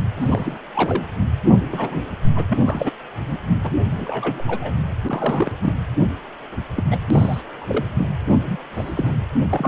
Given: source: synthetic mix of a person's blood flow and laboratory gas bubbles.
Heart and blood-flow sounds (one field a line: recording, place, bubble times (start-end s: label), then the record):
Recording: Doppler ultrasound of blood flow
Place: precordium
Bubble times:
0.20-0.57 s: bubbles
0.74-1.05 s: bubbles
1.71-2.02 s: bubbles
2.36-2.43 s: bubbles
2.49-2.92 s: bubbles
3.26-3.38 s: bubbles
3.63-3.71 s: bubbles
3.91-4.43 s: bubbles
4.46-4.75 s: bubbles
5.06-5.52 s: bubbles
5.60-5.73 s: bubbles
6.00-6.09 s: bubbles
6.76-6.83 s: bubbles
6.91-6.98 s: bubbles
7.10-7.42 s: bubbles
7.62-7.66 s: bubbles
7.68-7.83 s: bubbles
7.98-8.09 s: bubbles
8.27-8.36 s: bubbles
8.45-8.59 s: bubbles
8.71-9.15 s: bubbles
9.50-9.68 s: bubbles
From the record:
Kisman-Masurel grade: 242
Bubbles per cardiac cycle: several, 3 to 8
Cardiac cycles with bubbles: 100%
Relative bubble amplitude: moderate (0.250 to 0.450)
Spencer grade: 3 (all of the cardiac periods contain showers or single bubble signals, but not dominating or overriding the cardiac motion signals)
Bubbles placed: anywhere in the cardiac cycle